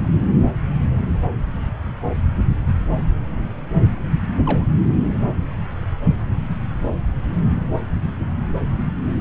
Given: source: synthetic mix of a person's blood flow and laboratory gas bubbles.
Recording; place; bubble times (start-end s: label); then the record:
Doppler ultrasound of blood flow; subclavian vein
4.37-4.66 s: bubbles
From the record:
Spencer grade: 1 (occasional bubble signal discernible with the cardiac motion signal, with majority of cardiac periods free of bubbles); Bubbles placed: anywhere in the cardiac cycle